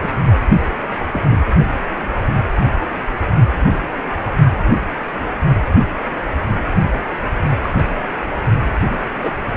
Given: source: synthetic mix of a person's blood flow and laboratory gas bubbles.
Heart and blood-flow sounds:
Doppler ultrasound of blood flow; precordium
0.00-0.22 s: bubbles
1.12-1.22 s: bubbles
1.25-1.42 s: bubbles
3.61-3.89 s: bubbles
4.25-4.32 s: bubbles
7.62-7.72 s: bubbles
7.78-7.83 s: bubbles
8.89-9.04 s: bubbles
9.22-9.31 s: bubbles
From the record:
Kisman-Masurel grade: 122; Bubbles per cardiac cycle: 1 to 2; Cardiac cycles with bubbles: 10 to 50%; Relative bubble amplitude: moderate (0.250 to 0.450); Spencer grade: 2 (many but less than half of the cardiac periods contain bubble signals, singularly or in groups); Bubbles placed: only in the low amplitude regions of the cardiac cycle

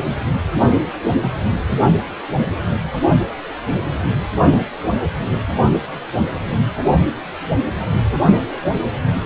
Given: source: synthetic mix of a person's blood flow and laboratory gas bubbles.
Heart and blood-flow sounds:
Doppler ultrasound of blood flow; precordium
no bubbles
From the record:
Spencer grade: 0 (complete lack of bubble signals)

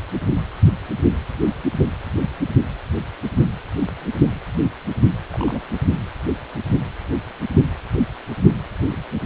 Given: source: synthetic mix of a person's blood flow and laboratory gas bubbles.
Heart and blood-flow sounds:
Doppler ultrasound of blood flow; precordium
5.29-5.62 s: bubbles
8.91-9.00 s: bubbles
From the record:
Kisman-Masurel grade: 121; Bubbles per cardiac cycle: 1 to 2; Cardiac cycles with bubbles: 10 to 50%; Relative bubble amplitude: barely perceptible (0.100 to 0.250); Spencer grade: 2 (many but less than half of the cardiac periods contain bubble signals, singularly or in groups); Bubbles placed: only in the low amplitude regions of the cardiac cycle

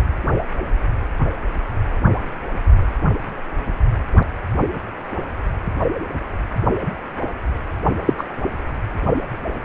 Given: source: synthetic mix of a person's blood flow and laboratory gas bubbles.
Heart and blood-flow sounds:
Doppler ultrasound of blood flow; precordium
8.05-8.13 s: bubbles
8.17-8.23 s: bubbles
From the record:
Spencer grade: 1 (occasional bubble signal discernible with the cardiac motion signal, with majority of cardiac periods free of bubbles); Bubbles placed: only in the low amplitude regions of the cardiac cycle

